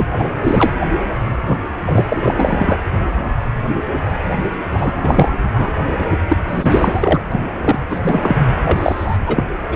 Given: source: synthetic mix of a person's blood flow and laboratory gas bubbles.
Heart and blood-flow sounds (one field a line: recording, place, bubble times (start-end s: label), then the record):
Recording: Doppler ultrasound of blood flow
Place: precordium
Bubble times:
0.00-0.07 s: bubbles
0.15-0.27 s: bubbles
0.42-0.74 s: bubbles
1.45-1.58 s: bubbles
1.84-2.77 s: bubbles
4.71-4.93 s: bubbles
4.96-5.32 s: bubbles
5.51-5.72 s: bubbles
5.98-6.06 s: bubbles
6.29-6.37 s: bubbles
6.48-7.22 s: bubbles
7.32-7.41 s: bubbles
7.61-7.79 s: bubbles
7.90-8.39 s: bubbles
8.64-9.18 s: bubbles
9.26-9.44 s: bubbles
9.68-9.76 s: bubbles
From the record:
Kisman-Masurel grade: 333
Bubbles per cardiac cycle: rolling drumbeat, 9 or more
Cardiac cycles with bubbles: 50 to 99%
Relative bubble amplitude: loud (0.450 to 0.775)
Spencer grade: 3 (all of the cardiac periods contain showers or single bubble signals, but not dominating or overriding the cardiac motion signals)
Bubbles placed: anywhere in the cardiac cycle